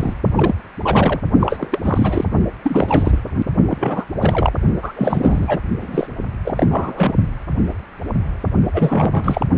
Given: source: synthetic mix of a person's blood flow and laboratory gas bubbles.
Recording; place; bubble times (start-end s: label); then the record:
Doppler ultrasound of blood flow; precordium
0.00-0.14 s: bubbles
0.36-0.54 s: bubbles
0.82-1.20 s: bubbles
1.41-2.25 s: bubbles
2.64-3.21 s: bubbles
3.70-4.04 s: bubbles
4.21-4.53 s: bubbles
4.82-4.93 s: bubbles
4.96-5.59 s: bubbles
5.81-6.07 s: bubbles
6.45-6.67 s: bubbles
6.70-7.12 s: bubbles
8.73-9.46 s: bubbles
From the record:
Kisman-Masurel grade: 332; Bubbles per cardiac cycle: rolling drumbeat, 9 or more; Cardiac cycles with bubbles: 50 to 99%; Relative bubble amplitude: moderate (0.250 to 0.450); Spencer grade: 3 (all of the cardiac periods contain showers or single bubble signals, but not dominating or overriding the cardiac motion signals); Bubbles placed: only in the low amplitude regions of the cardiac cycle